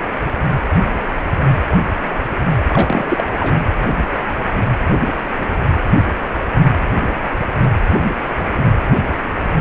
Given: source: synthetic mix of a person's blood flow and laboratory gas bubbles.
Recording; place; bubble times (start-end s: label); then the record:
Doppler ultrasound of blood flow; precordium
2.70-3.24 s: bubbles
3.40-3.59 s: bubbles
From the record:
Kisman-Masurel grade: 212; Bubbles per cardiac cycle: several, 3 to 8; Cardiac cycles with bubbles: 1 to 10%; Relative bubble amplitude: moderate (0.250 to 0.450); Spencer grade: 1 (occasional bubble signal discernible with the cardiac motion signal, with majority of cardiac periods free of bubbles); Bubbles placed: anywhere in the cardiac cycle